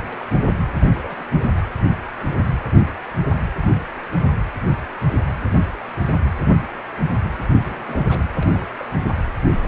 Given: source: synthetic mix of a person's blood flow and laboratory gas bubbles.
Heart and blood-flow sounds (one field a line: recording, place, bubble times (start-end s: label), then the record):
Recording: Doppler ultrasound of blood flow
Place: precordium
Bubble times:
0.00-0.27 s: bubbles
0.45-0.57 s: bubbles
0.79-0.87 s: bubbles
0.91-1.23 s: bubbles
1.29-1.43 s: bubbles
1.56-1.61 s: bubbles
7.36-8.25 s: bubbles
8.34-8.66 s: bubbles
8.79-8.84 s: bubbles
9.03-9.11 s: bubbles
9.27-9.32 s: bubbles
9.62-9.68 s: bubbles
From the record:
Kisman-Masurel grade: 221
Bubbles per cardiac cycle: several, 3 to 8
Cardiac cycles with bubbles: 10 to 50%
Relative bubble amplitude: barely perceptible (0.100 to 0.250)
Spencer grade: 2 (many but less than half of the cardiac periods contain bubble signals, singularly or in groups)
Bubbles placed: anywhere in the cardiac cycle